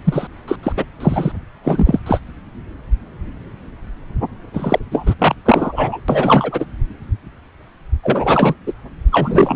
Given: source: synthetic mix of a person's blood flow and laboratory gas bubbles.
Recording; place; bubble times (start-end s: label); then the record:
Doppler ultrasound of blood flow; subclavian vein
0.04-0.27 s: bubbles
0.48-0.56 s: bubbles
0.63-0.72 s: bubbles
0.76-0.84 s: bubbles
1.00-1.32 s: bubbles
1.64-1.99 s: bubbles
2.06-2.21 s: bubbles
4.53-4.79 s: bubbles
4.91-5.15 s: bubbles
5.18-5.35 s: bubbles
5.45-6.00 s: bubbles
6.08-6.66 s: bubbles
8.03-8.54 s: bubbles
8.66-8.73 s: bubbles
9.12-9.56 s: bubbles
From the record:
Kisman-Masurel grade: 333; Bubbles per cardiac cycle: rolling drumbeat, 9 or more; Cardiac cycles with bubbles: 50 to 99%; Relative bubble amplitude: loud (0.450 to 0.775); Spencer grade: 3 (all of the cardiac periods contain showers or single bubble signals, but not dominating or overriding the cardiac motion signals); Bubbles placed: anywhere in the cardiac cycle